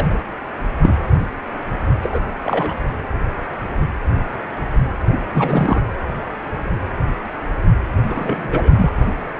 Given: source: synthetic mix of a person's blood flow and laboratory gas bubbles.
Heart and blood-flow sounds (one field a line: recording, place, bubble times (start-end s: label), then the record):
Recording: Doppler ultrasound of blood flow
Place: precordium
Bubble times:
0.00-0.21 s: bubbles
0.82-1.06 s: bubbles
2.02-2.21 s: bubbles
2.42-2.75 s: bubbles
5.11-5.20 s: bubbles
5.34-5.81 s: bubbles
8.06-8.91 s: bubbles
From the record:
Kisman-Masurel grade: 223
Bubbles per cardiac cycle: several, 3 to 8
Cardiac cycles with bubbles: 10 to 50%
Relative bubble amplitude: loud (0.450 to 0.775)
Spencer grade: 2 (many but less than half of the cardiac periods contain bubble signals, singularly or in groups)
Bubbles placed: anywhere in the cardiac cycle